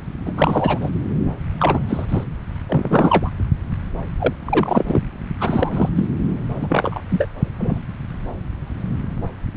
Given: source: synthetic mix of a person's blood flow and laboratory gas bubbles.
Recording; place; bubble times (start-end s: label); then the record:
Doppler ultrasound of blood flow; subclavian vein
0.25-0.91 s: bubbles
1.59-1.82 s: bubbles
1.89-2.05 s: bubbles
2.08-2.24 s: bubbles
2.68-3.29 s: bubbles
4.19-4.33 s: bubbles
4.45-5.01 s: bubbles
5.40-5.90 s: bubbles
5.95-6.06 s: bubbles
6.57-7.00 s: bubbles
7.11-7.25 s: bubbles
7.59-7.81 s: bubbles
From the record:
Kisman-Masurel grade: 233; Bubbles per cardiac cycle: several, 3 to 8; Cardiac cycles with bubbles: 50 to 99%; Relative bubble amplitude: loud (0.450 to 0.775); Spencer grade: 3 (all of the cardiac periods contain showers or single bubble signals, but not dominating or overriding the cardiac motion signals); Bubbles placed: anywhere in the cardiac cycle